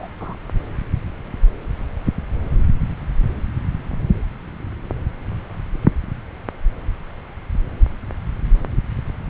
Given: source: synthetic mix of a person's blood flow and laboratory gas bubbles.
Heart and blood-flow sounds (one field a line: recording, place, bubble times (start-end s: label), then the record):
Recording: Doppler ultrasound of blood flow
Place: subclavian vein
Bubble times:
0.00-0.08 s: bubbles
0.20-0.34 s: bubbles
From the record:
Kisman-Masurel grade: 111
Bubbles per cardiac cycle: 1 to 2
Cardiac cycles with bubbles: 1 to 10%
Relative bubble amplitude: barely perceptible (0.100 to 0.250)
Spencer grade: 1 (occasional bubble signal discernible with the cardiac motion signal, with majority of cardiac periods free of bubbles)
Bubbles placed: anywhere in the cardiac cycle